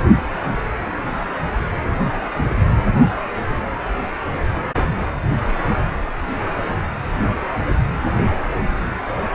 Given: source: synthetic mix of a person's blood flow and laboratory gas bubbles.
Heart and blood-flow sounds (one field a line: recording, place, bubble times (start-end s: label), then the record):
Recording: Doppler ultrasound of blood flow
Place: precordium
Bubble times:
2.37-2.51 s: bubbles
From the record:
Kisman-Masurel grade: 111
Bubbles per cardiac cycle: 1 to 2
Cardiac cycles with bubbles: 1 to 10%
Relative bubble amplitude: barely perceptible (0.100 to 0.250)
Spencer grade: 1 (occasional bubble signal discernible with the cardiac motion signal, with majority of cardiac periods free of bubbles)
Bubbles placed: anywhere in the cardiac cycle